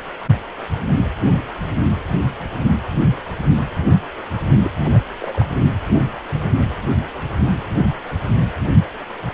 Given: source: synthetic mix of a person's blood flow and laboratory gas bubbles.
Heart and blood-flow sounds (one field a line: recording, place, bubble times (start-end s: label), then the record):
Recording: Doppler ultrasound of blood flow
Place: precordium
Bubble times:
4.64-4.71 s: bubbles
4.84-4.89 s: bubbles
4.93-4.98 s: bubbles
5.19-5.45 s: bubbles
From the record:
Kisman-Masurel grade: 211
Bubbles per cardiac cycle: several, 3 to 8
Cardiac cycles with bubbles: 1 to 10%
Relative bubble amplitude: barely perceptible (0.100 to 0.250)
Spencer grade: 1 (occasional bubble signal discernible with the cardiac motion signal, with majority of cardiac periods free of bubbles)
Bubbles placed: only in the low amplitude regions of the cardiac cycle